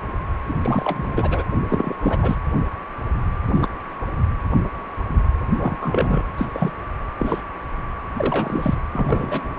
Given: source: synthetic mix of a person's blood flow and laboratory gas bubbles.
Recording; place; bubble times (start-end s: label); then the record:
Doppler ultrasound of blood flow; precordium
0.47-1.44 s: bubbles
1.70-1.96 s: bubbles
2.02-2.35 s: bubbles
3.46-3.69 s: bubbles
5.51-6.24 s: bubbles
6.38-6.49 s: bubbles
6.53-6.72 s: bubbles
7.19-7.42 s: bubbles
8.18-8.75 s: bubbles
8.93-9.54 s: bubbles
From the record:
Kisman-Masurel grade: 232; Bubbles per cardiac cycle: several, 3 to 8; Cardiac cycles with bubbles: 50 to 99%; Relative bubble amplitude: moderate (0.250 to 0.450); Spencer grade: 3 (all of the cardiac periods contain showers or single bubble signals, but not dominating or overriding the cardiac motion signals); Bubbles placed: anywhere in the cardiac cycle